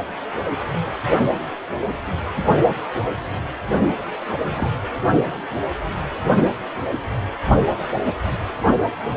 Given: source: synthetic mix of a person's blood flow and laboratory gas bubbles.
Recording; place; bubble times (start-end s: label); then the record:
Doppler ultrasound of blood flow; precordium
4.49-4.71 s: bubbles
From the record:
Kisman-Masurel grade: 111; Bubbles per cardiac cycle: 1 to 2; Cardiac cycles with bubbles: 1 to 10%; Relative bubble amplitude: barely perceptible (0.100 to 0.250); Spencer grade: 1 (occasional bubble signal discernible with the cardiac motion signal, with majority of cardiac periods free of bubbles); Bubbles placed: only in the low amplitude regions of the cardiac cycle